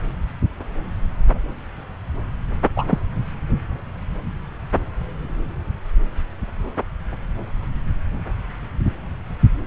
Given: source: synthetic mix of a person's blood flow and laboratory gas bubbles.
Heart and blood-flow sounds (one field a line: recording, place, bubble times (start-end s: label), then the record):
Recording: Doppler ultrasound of blood flow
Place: subclavian vein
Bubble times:
2.75-2.98 s: bubbles
From the record:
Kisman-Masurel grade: 113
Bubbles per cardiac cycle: 1 to 2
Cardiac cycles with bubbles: 1 to 10%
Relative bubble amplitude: loud (0.450 to 0.775)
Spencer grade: 1 (occasional bubble signal discernible with the cardiac motion signal, with majority of cardiac periods free of bubbles)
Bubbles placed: anywhere in the cardiac cycle